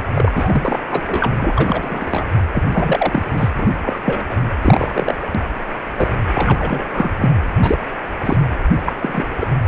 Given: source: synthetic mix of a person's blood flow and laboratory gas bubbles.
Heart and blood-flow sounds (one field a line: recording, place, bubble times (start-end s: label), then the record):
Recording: Doppler ultrasound of blood flow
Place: precordium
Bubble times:
0.14-0.32 s: bubbles
0.35-0.79 s: bubbles
0.89-1.30 s: bubbles
1.39-2.27 s: bubbles
2.52-3.24 s: bubbles
3.33-3.50 s: bubbles
3.58-3.71 s: bubbles
3.81-3.99 s: bubbles
4.04-4.38 s: bubbles
4.61-5.13 s: bubbles
5.95-6.09 s: bubbles
6.34-6.91 s: bubbles
6.95-7.10 s: bubbles
7.20-7.29 s: bubbles
7.58-7.79 s: bubbles
8.25-8.37 s: bubbles
8.85-8.93 s: bubbles
9.00-9.23 s: bubbles
9.38-9.46 s: bubbles
From the record:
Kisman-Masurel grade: 243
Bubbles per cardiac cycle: several, 3 to 8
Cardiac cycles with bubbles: 100%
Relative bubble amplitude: loud (0.450 to 0.775)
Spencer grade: 3 (all of the cardiac periods contain showers or single bubble signals, but not dominating or overriding the cardiac motion signals)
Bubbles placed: anywhere in the cardiac cycle